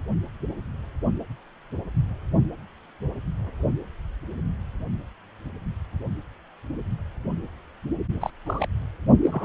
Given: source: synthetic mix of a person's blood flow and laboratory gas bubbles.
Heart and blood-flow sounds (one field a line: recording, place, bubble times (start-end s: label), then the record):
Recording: Doppler ultrasound of blood flow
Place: precordium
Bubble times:
8.21-8.30 s: bubbles
8.46-8.67 s: bubbles
9.24-9.45 s: bubbles
From the record:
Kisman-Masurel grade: 221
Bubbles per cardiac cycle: several, 3 to 8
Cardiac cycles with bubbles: 10 to 50%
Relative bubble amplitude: barely perceptible (0.100 to 0.250)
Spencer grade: 2 (many but less than half of the cardiac periods contain bubble signals, singularly or in groups)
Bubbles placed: only in the low amplitude regions of the cardiac cycle